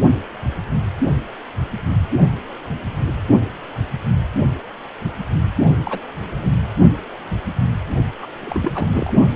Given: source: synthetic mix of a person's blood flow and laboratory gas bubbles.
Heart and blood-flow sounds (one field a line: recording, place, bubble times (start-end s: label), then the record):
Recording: Doppler ultrasound of blood flow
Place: precordium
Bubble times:
5.83-5.99 s: bubbles
6.38-6.50 s: bubbles
8.21-8.27 s: bubbles
8.40-8.87 s: bubbles
8.93-9.12 s: bubbles
From the record:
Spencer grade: 2 (many but less than half of the cardiac periods contain bubble signals, singularly or in groups)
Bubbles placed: only in the low amplitude regions of the cardiac cycle